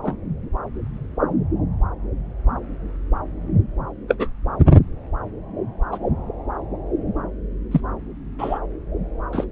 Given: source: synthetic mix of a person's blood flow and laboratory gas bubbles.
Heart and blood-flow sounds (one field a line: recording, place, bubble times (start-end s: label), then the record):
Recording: Doppler ultrasound of blood flow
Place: subclavian vein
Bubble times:
0.02-0.17 s: bubbles
4.08-4.15 s: bubbles
4.19-4.29 s: bubbles
5.92-5.98 s: bubbles
7.71-7.81 s: bubbles
8.38-8.59 s: bubbles
9.33-9.46 s: bubbles
From the record:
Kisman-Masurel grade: 122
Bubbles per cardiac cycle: 1 to 2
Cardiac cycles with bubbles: 10 to 50%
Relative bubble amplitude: moderate (0.250 to 0.450)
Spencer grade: 2 (many but less than half of the cardiac periods contain bubble signals, singularly or in groups)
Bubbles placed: anywhere in the cardiac cycle